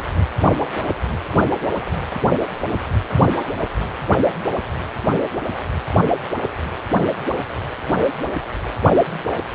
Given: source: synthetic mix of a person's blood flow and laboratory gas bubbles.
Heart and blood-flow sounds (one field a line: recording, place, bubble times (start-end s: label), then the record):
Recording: Doppler ultrasound of blood flow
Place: precordium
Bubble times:
no bubbles
From the record:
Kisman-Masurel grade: 000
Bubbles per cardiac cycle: 0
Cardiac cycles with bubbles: 0%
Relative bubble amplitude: no bubbles discernible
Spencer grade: 0 (complete lack of bubble signals)